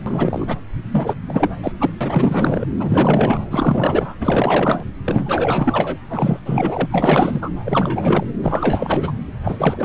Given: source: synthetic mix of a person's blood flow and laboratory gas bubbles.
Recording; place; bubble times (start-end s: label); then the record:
Doppler ultrasound of blood flow; subclavian vein
0.06-0.58 s: bubbles
0.91-1.15 s: bubbles
1.28-1.49 s: bubbles
1.62-1.72 s: bubbles
1.80-1.90 s: bubbles
2.00-2.67 s: bubbles
2.79-3.40 s: bubbles
3.51-4.15 s: bubbles
4.21-4.85 s: bubbles
5.05-5.97 s: bubbles
6.08-6.40 s: bubbles
6.45-6.87 s: bubbles
6.91-7.51 s: bubbles
7.64-8.24 s: bubbles
8.43-9.12 s: bubbles
9.45-9.84 s: bubbles
From the record:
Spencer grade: 4 (maximum detectable bubble signal sounding continuously throughout systole and diastole of every cardiac period, and overriding the amplitude of the normal cardiac signals); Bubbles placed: anywhere in the cardiac cycle